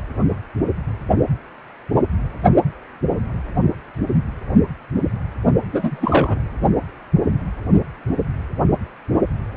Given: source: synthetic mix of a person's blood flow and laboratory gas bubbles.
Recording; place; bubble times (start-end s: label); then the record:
Doppler ultrasound of blood flow; precordium
5.72-6.38 s: bubbles
From the record:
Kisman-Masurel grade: 212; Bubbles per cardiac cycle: several, 3 to 8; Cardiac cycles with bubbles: 1 to 10%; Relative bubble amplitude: moderate (0.250 to 0.450); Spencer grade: 1 (occasional bubble signal discernible with the cardiac motion signal, with majority of cardiac periods free of bubbles); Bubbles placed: only in the low amplitude regions of the cardiac cycle